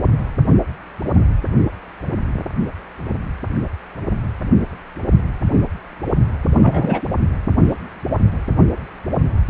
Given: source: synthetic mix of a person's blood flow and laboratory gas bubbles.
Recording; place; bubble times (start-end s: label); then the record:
Doppler ultrasound of blood flow; precordium
6.58-7.01 s: bubbles
From the record:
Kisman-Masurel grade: 113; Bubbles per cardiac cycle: 1 to 2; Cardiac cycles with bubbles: 1 to 10%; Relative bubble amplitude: loud (0.450 to 0.775); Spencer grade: 1 (occasional bubble signal discernible with the cardiac motion signal, with majority of cardiac periods free of bubbles); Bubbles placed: anywhere in the cardiac cycle